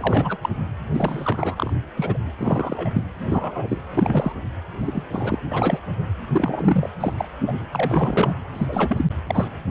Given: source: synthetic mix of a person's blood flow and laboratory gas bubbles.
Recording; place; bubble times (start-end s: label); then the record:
Doppler ultrasound of blood flow; precordium
0.00-0.38 s: bubbles
0.43-0.49 s: bubbles
0.94-1.73 s: bubbles
1.97-2.17 s: bubbles
2.37-2.90 s: bubbles
2.94-3.03 s: bubbles
3.13-3.81 s: bubbles
3.90-4.33 s: bubbles
4.78-5.03 s: bubbles
5.11-5.38 s: bubbles
5.51-5.80 s: bubbles
6.33-6.89 s: bubbles
7.00-7.13 s: bubbles
7.17-7.29 s: bubbles
7.47-7.66 s: bubbles
7.72-8.36 s: bubbles
8.54-9.05 s: bubbles
9.27-9.48 s: bubbles
From the record:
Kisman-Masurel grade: 242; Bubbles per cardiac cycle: several, 3 to 8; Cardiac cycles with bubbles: 100%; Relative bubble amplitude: moderate (0.250 to 0.450); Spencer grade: 3 (all of the cardiac periods contain showers or single bubble signals, but not dominating or overriding the cardiac motion signals); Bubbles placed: anywhere in the cardiac cycle